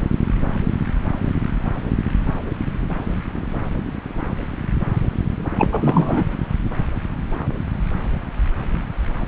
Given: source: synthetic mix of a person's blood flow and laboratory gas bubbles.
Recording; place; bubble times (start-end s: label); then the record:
Doppler ultrasound of blood flow; subclavian vein
5.57-5.69 s: bubbles
5.71-6.23 s: bubbles
From the record:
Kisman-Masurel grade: 223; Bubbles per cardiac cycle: several, 3 to 8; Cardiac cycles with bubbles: 10 to 50%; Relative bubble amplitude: loud (0.450 to 0.775); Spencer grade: 2 (many but less than half of the cardiac periods contain bubble signals, singularly or in groups); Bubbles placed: anywhere in the cardiac cycle